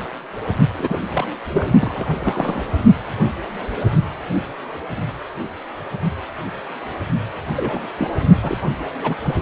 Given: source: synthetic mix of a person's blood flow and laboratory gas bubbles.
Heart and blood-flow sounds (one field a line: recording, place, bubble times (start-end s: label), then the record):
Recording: Doppler ultrasound of blood flow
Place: precordium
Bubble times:
0.74-0.99 s: bubbles
1.13-1.25 s: bubbles
1.50-1.71 s: bubbles
1.81-2.65 s: bubbles
7.56-7.86 s: bubbles
7.97-8.10 s: bubbles
8.41-8.57 s: bubbles
9.01-9.15 s: bubbles
9.23-9.35 s: bubbles
From the record:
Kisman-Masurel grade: 222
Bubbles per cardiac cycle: several, 3 to 8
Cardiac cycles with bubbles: 10 to 50%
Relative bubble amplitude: moderate (0.250 to 0.450)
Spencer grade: 2 (many but less than half of the cardiac periods contain bubble signals, singularly or in groups)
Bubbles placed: only in the low amplitude regions of the cardiac cycle